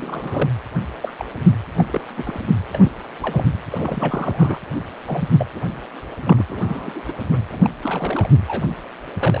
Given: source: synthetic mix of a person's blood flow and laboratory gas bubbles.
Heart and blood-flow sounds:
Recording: Doppler ultrasound of blood flow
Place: precordium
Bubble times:
0.00-0.50 s: bubbles
1.01-1.10 s: bubbles
1.19-1.24 s: bubbles
1.78-1.84 s: bubbles
1.91-2.00 s: bubbles
2.17-2.41 s: bubbles
2.71-2.81 s: bubbles
2.85-2.93 s: bubbles
3.22-3.44 s: bubbles
3.70-4.58 s: bubbles
5.07-5.28 s: bubbles
5.39-5.46 s: bubbles
5.55-5.63 s: bubbles
6.23-6.44 s: bubbles
6.49-7.04 s: bubbles
7.08-7.12 s: bubbles
7.32-7.39 s: bubbles
7.50-7.70 s: bubbles
7.83-8.30 s: bubbles
8.47-8.65 s: bubbles
9.15-9.40 s: bubbles
From the record:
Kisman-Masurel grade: 242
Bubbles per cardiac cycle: several, 3 to 8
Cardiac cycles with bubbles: 100%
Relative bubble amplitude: moderate (0.250 to 0.450)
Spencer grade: 3 (all of the cardiac periods contain showers or single bubble signals, but not dominating or overriding the cardiac motion signals)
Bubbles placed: anywhere in the cardiac cycle

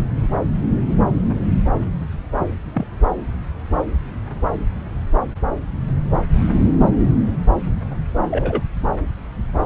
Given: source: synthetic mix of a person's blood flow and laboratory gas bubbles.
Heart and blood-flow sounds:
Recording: Doppler ultrasound of blood flow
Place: subclavian vein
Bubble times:
2.73-2.87 s: bubbles
8.30-8.63 s: bubbles
From the record:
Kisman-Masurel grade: 112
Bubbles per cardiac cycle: 1 to 2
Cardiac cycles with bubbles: 1 to 10%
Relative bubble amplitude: moderate (0.250 to 0.450)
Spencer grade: 1 (occasional bubble signal discernible with the cardiac motion signal, with majority of cardiac periods free of bubbles)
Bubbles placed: anywhere in the cardiac cycle

